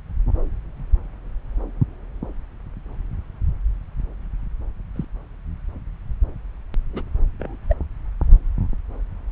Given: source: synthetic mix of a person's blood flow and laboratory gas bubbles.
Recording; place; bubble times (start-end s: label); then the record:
Doppler ultrasound of blood flow; subclavian vein
4.96-5.05 s: bubbles
6.93-7.02 s: bubbles
7.39-7.56 s: bubbles
7.69-7.75 s: bubbles
From the record:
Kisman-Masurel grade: 121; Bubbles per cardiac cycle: 1 to 2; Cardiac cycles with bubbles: 10 to 50%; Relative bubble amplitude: barely perceptible (0.100 to 0.250); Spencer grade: 2 (many but less than half of the cardiac periods contain bubble signals, singularly or in groups); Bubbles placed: anywhere in the cardiac cycle